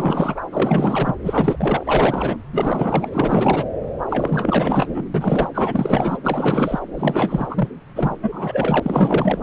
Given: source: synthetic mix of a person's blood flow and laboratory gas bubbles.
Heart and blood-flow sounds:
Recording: Doppler ultrasound of blood flow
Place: subclavian vein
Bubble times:
0.00-0.42 s: bubbles
0.52-1.16 s: bubbles
1.23-2.37 s: bubbles
2.52-3.08 s: bubbles
3.14-3.65 s: bubbles
4.08-5.04 s: bubbles
5.14-5.50 s: bubbles
5.54-6.18 s: bubbles
6.24-6.79 s: bubbles
6.95-7.69 s: bubbles
7.95-8.16 s: bubbles
8.21-8.80 s: bubbles
8.82-9.40 s: bubbles
From the record:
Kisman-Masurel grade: 444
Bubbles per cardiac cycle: continuous sound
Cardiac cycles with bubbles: 100%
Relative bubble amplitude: maximal (0.775 to 0.999)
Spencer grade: 4 (maximum detectable bubble signal sounding continuously throughout systole and diastole of every cardiac period, and overriding the amplitude of the normal cardiac signals)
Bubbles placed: anywhere in the cardiac cycle

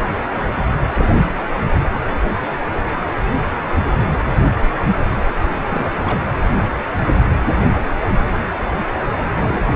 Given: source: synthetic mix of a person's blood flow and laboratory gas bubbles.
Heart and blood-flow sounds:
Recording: Doppler ultrasound of blood flow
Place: precordium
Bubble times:
0.94-1.17 s: bubbles
5.70-5.91 s: bubbles
6.02-6.21 s: bubbles
9.31-9.74 s: bubbles
From the record:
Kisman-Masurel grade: 221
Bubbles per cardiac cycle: several, 3 to 8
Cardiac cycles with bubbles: 10 to 50%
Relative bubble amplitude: barely perceptible (0.100 to 0.250)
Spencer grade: 2 (many but less than half of the cardiac periods contain bubble signals, singularly or in groups)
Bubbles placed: anywhere in the cardiac cycle

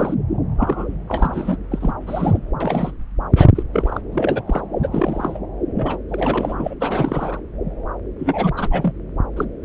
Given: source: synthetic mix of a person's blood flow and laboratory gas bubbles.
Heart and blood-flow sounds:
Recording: Doppler ultrasound of blood flow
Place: subclavian vein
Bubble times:
0.00-0.14 s: bubbles
0.58-0.93 s: bubbles
1.08-1.57 s: bubbles
1.71-1.94 s: bubbles
2.00-2.39 s: bubbles
2.60-2.92 s: bubbles
3.31-3.50 s: bubbles
3.55-3.63 s: bubbles
3.73-4.00 s: bubbles
4.12-4.42 s: bubbles
4.47-4.62 s: bubbles
4.83-4.88 s: bubbles
4.92-5.40 s: bubbles
5.74-5.97 s: bubbles
6.08-6.75 s: bubbles
6.79-7.41 s: bubbles
8.19-8.49 s: bubbles
8.56-8.92 s: bubbles
9.37-9.45 s: bubbles
9.62-9.65 s: bubbles
From the record:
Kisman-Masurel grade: 242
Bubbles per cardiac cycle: several, 3 to 8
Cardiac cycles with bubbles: 100%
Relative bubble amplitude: moderate (0.250 to 0.450)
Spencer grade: 3 (all of the cardiac periods contain showers or single bubble signals, but not dominating or overriding the cardiac motion signals)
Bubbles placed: anywhere in the cardiac cycle

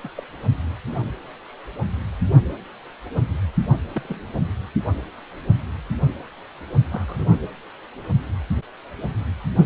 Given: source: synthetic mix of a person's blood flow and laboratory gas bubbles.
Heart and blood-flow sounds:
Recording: Doppler ultrasound of blood flow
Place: precordium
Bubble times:
0.04-0.09 s: bubbles
0.15-0.24 s: bubbles
3.95-4.19 s: bubbles
6.85-7.36 s: bubbles
From the record:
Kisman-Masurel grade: 121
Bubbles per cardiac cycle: 1 to 2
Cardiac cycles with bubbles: 10 to 50%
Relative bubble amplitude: barely perceptible (0.100 to 0.250)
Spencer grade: 2 (many but less than half of the cardiac periods contain bubble signals, singularly or in groups)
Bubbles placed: anywhere in the cardiac cycle

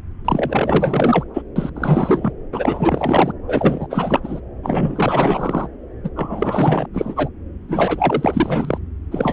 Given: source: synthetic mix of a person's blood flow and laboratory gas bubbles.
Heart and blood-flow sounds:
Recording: Doppler ultrasound of blood flow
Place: subclavian vein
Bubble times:
0.24-1.24 s: bubbles
1.33-1.42 s: bubbles
1.56-1.69 s: bubbles
1.75-2.32 s: bubbles
2.52-3.33 s: bubbles
3.48-4.40 s: bubbles
4.62-5.68 s: bubbles
6.04-6.10 s: bubbles
6.15-6.87 s: bubbles
6.93-7.29 s: bubbles
7.68-8.79 s: bubbles
9.11-9.33 s: bubbles
From the record:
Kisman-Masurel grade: 444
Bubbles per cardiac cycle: continuous sound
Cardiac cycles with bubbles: 100%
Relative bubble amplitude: maximal (0.775 to 0.999)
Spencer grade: 4 (maximum detectable bubble signal sounding continuously throughout systole and diastole of every cardiac period, and overriding the amplitude of the normal cardiac signals)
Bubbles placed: anywhere in the cardiac cycle

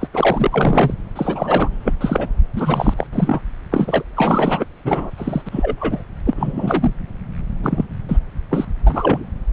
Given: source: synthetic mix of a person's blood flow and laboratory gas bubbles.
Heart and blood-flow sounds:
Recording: Doppler ultrasound of blood flow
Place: subclavian vein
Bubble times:
0.00-0.08 s: bubbles
0.14-0.94 s: bubbles
1.16-1.69 s: bubbles
1.85-1.92 s: bubbles
2.01-2.29 s: bubbles
2.55-2.94 s: bubbles
2.97-3.07 s: bubbles
3.12-3.41 s: bubbles
3.71-4.03 s: bubbles
4.15-4.65 s: bubbles
4.84-5.12 s: bubbles
5.18-5.42 s: bubbles
5.46-6.04 s: bubbles
6.25-6.94 s: bubbles
7.63-7.85 s: bubbles
8.08-8.18 s: bubbles
8.49-8.65 s: bubbles
8.86-9.23 s: bubbles
From the record:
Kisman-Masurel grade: 243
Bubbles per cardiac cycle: several, 3 to 8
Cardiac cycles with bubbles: 100%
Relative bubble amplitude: loud (0.450 to 0.775)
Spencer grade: 3 (all of the cardiac periods contain showers or single bubble signals, but not dominating or overriding the cardiac motion signals)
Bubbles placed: anywhere in the cardiac cycle

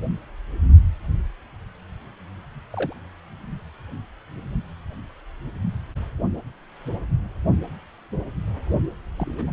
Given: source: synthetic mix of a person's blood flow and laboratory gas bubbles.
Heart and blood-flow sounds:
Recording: Doppler ultrasound of blood flow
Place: precordium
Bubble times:
2.73-2.93 s: bubbles
9.17-9.51 s: bubbles
From the record:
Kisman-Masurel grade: 121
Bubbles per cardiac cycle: 1 to 2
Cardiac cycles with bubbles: 10 to 50%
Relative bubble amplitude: barely perceptible (0.100 to 0.250)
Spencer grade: 2 (many but less than half of the cardiac periods contain bubble signals, singularly or in groups)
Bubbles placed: only in the low amplitude regions of the cardiac cycle

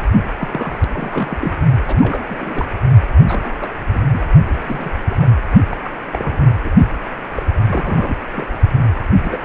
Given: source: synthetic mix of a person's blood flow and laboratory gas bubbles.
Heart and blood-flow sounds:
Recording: Doppler ultrasound of blood flow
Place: precordium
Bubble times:
0.40-0.78 s: bubbles
0.93-1.58 s: bubbles
1.86-2.65 s: bubbles
3.28-3.73 s: bubbles
3.94-4.00 s: bubbles
4.12-4.23 s: bubbles
4.58-4.89 s: bubbles
5.09-5.25 s: bubbles
5.71-5.76 s: bubbles
5.83-5.91 s: bubbles
6.12-6.56 s: bubbles
6.64-6.70 s: bubbles
7.34-7.43 s: bubbles
7.66-8.16 s: bubbles
8.35-8.46 s: bubbles
9.00-9.06 s: bubbles
9.23-9.38 s: bubbles
From the record:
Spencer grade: 3 (all of the cardiac periods contain showers or single bubble signals, but not dominating or overriding the cardiac motion signals)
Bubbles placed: only in the low amplitude regions of the cardiac cycle

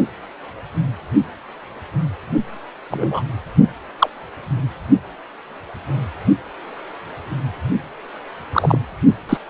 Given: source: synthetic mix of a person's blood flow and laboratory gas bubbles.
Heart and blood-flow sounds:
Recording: Doppler ultrasound of blood flow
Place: precordium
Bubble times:
2.91-3.23 s: bubbles
3.99-4.09 s: bubbles
8.53-8.79 s: bubbles
9.29-9.38 s: bubbles
From the record:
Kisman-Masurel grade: 123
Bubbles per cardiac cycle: 1 to 2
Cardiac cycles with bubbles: 10 to 50%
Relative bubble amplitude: loud (0.450 to 0.775)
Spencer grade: 2 (many but less than half of the cardiac periods contain bubble signals, singularly or in groups)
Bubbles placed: only in the low amplitude regions of the cardiac cycle

